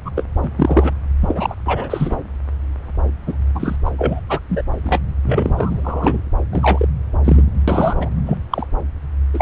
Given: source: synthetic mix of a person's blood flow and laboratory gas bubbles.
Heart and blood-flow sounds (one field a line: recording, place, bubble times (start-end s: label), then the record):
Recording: Doppler ultrasound of blood flow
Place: subclavian vein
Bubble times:
0.05-0.12 s: bubbles
0.17-0.23 s: bubbles
0.42-0.48 s: bubbles
0.55-0.90 s: bubbles
1.21-1.55 s: bubbles
1.66-2.16 s: bubbles
3.26-3.36 s: bubbles
3.54-3.76 s: bubbles
3.85-3.90 s: bubbles
3.98-4.20 s: bubbles
4.29-4.40 s: bubbles
4.49-4.62 s: bubbles
4.83-5.00 s: bubbles
5.25-6.21 s: bubbles
6.52-6.88 s: bubbles
7.24-7.43 s: bubbles
7.68-8.10 s: bubbles
8.26-8.38 s: bubbles
8.51-8.66 s: bubbles
9.34-9.42 s: bubbles
From the record:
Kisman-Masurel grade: 233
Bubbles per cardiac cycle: several, 3 to 8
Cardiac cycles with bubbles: 50 to 99%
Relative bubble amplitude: loud (0.450 to 0.775)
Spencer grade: 3 (all of the cardiac periods contain showers or single bubble signals, but not dominating or overriding the cardiac motion signals)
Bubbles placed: anywhere in the cardiac cycle